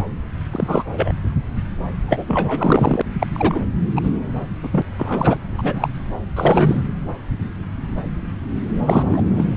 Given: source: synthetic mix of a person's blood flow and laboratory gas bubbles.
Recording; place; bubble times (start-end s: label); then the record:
Doppler ultrasound of blood flow; subclavian vein
0.51-0.83 s: bubbles
0.93-1.12 s: bubbles
2.08-3.02 s: bubbles
3.19-3.27 s: bubbles
3.33-3.59 s: bubbles
3.95-4.11 s: bubbles
4.62-4.68 s: bubbles
4.71-4.82 s: bubbles
4.97-5.37 s: bubbles
5.57-5.89 s: bubbles
6.35-6.82 s: bubbles
8.85-9.23 s: bubbles
9.37-9.48 s: bubbles
From the record:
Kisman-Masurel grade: 233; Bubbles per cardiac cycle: several, 3 to 8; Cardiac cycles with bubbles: 50 to 99%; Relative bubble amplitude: loud (0.450 to 0.775); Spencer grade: 3 (all of the cardiac periods contain showers or single bubble signals, but not dominating or overriding the cardiac motion signals); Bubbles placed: anywhere in the cardiac cycle